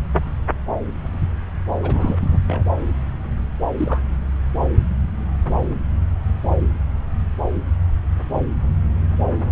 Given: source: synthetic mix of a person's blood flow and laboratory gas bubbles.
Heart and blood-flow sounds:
Doppler ultrasound of blood flow; subclavian vein
1.83-2.17 s: bubbles
2.21-2.39 s: bubbles
2.47-2.63 s: bubbles
3.77-4.01 s: bubbles
From the record:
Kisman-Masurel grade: 222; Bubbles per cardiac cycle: several, 3 to 8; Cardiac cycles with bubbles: 10 to 50%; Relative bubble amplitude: moderate (0.250 to 0.450); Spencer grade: 2 (many but less than half of the cardiac periods contain bubble signals, singularly or in groups); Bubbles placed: anywhere in the cardiac cycle

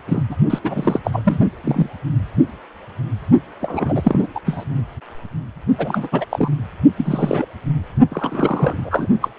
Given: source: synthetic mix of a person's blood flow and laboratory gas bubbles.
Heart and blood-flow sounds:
Doppler ultrasound of blood flow; precordium
0.08-0.23 s: bubbles
0.29-0.36 s: bubbles
0.50-0.59 s: bubbles
0.64-0.99 s: bubbles
1.04-1.39 s: bubbles
1.64-1.90 s: bubbles
3.60-4.28 s: bubbles
4.35-4.40 s: bubbles
4.46-4.65 s: bubbles
5.78-6.08 s: bubbles
6.12-6.25 s: bubbles
6.29-6.51 s: bubbles
6.97-7.47 s: bubbles
8.10-9.07 s: bubbles
9.21-9.29 s: bubbles
From the record:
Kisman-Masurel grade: 333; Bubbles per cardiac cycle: rolling drumbeat, 9 or more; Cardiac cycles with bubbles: 50 to 99%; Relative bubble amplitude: loud (0.450 to 0.775); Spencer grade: 3 (all of the cardiac periods contain showers or single bubble signals, but not dominating or overriding the cardiac motion signals); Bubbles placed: only in the low amplitude regions of the cardiac cycle

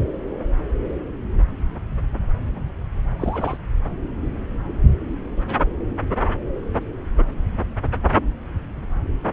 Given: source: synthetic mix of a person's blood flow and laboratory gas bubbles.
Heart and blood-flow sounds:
Doppler ultrasound of blood flow; subclavian vein
3.19-3.57 s: bubbles
From the record:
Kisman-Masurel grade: 211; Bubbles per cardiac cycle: several, 3 to 8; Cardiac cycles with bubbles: 1 to 10%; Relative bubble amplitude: barely perceptible (0.100 to 0.250); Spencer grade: 1 (occasional bubble signal discernible with the cardiac motion signal, with majority of cardiac periods free of bubbles); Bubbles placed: anywhere in the cardiac cycle

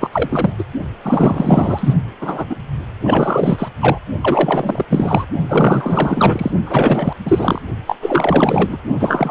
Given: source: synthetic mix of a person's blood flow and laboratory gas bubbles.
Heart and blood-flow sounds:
Doppler ultrasound of blood flow; precordium
0.00-0.55 s: bubbles
0.59-0.64 s: bubbles
1.02-1.94 s: bubbles
2.21-2.45 s: bubbles
2.50-2.55 s: bubbles
3.03-3.69 s: bubbles
3.81-3.98 s: bubbles
4.21-4.86 s: bubbles
4.90-5.25 s: bubbles
5.48-6.51 s: bubbles
6.66-7.13 s: bubbles
7.25-7.62 s: bubbles
7.87-7.96 s: bubbles
8.02-8.78 s: bubbles
9.00-9.31 s: bubbles
From the record:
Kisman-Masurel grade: 444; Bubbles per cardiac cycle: continuous sound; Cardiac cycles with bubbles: 100%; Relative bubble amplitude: maximal (0.775 to 0.999); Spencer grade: 4 (maximum detectable bubble signal sounding continuously throughout systole and diastole of every cardiac period, and overriding the amplitude of the normal cardiac signals); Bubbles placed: only in the low amplitude regions of the cardiac cycle

